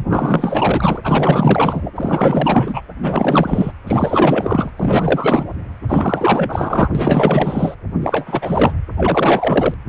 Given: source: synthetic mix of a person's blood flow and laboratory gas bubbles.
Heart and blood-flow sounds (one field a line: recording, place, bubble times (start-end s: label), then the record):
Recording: Doppler ultrasound of blood flow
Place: precordium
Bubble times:
0.09-0.99 s: bubbles
1.03-1.90 s: bubbles
1.95-2.82 s: bubbles
3.02-3.72 s: bubbles
3.86-4.70 s: bubbles
4.76-5.47 s: bubbles
5.88-6.88 s: bubbles
6.95-7.76 s: bubbles
8.01-8.73 s: bubbles
8.97-9.74 s: bubbles
From the record:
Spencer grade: 4 (maximum detectable bubble signal sounding continuously throughout systole and diastole of every cardiac period, and overriding the amplitude of the normal cardiac signals)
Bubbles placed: anywhere in the cardiac cycle